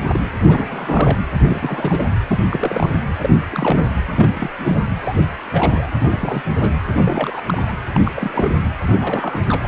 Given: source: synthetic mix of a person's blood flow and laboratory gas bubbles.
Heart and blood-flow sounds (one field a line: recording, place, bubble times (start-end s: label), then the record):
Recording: Doppler ultrasound of blood flow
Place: precordium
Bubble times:
0.00-0.19 s: bubbles
0.40-1.18 s: bubbles
1.45-2.08 s: bubbles
2.27-2.39 s: bubbles
2.49-2.90 s: bubbles
3.19-3.29 s: bubbles
3.51-3.97 s: bubbles
4.06-4.48 s: bubbles
4.58-4.80 s: bubbles
4.95-5.29 s: bubbles
5.40-5.90 s: bubbles
6.00-6.06 s: bubbles
6.08-6.45 s: bubbles
6.60-6.74 s: bubbles
6.95-7.42 s: bubbles
7.46-7.73 s: bubbles
7.93-8.00 s: bubbles
8.04-8.12 s: bubbles
8.15-8.55 s: bubbles
8.87-9.68 s: bubbles
From the record:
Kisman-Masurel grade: 342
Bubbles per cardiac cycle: rolling drumbeat, 9 or more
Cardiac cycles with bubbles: 100%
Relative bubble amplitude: moderate (0.250 to 0.450)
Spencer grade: 3 (all of the cardiac periods contain showers or single bubble signals, but not dominating or overriding the cardiac motion signals)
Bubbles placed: anywhere in the cardiac cycle